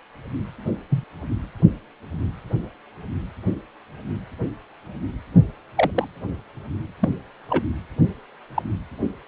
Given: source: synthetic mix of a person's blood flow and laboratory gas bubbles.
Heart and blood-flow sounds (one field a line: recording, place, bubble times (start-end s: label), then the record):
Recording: Doppler ultrasound of blood flow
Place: precordium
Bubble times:
0.90-1.04 s: bubbles
5.75-5.91 s: bubbles
5.95-6.08 s: bubbles
7.00-7.09 s: bubbles
7.49-7.63 s: bubbles
8.54-8.62 s: bubbles
From the record:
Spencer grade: 2 (many but less than half of the cardiac periods contain bubble signals, singularly or in groups)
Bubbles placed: anywhere in the cardiac cycle